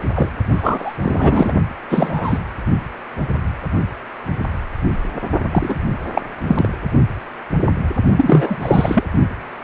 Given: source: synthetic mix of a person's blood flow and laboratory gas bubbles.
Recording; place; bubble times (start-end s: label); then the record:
Doppler ultrasound of blood flow; precordium
0.14-0.28 s: bubbles
0.53-0.96 s: bubbles
1.02-1.54 s: bubbles
1.90-2.39 s: bubbles
5.52-5.75 s: bubbles
6.13-6.21 s: bubbles
6.47-6.69 s: bubbles
8.17-8.57 s: bubbles
8.62-9.04 s: bubbles
From the record:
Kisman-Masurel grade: 233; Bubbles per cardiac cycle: several, 3 to 8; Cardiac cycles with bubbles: 50 to 99%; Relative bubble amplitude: loud (0.450 to 0.775); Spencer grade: 3 (all of the cardiac periods contain showers or single bubble signals, but not dominating or overriding the cardiac motion signals); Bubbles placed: only in the low amplitude regions of the cardiac cycle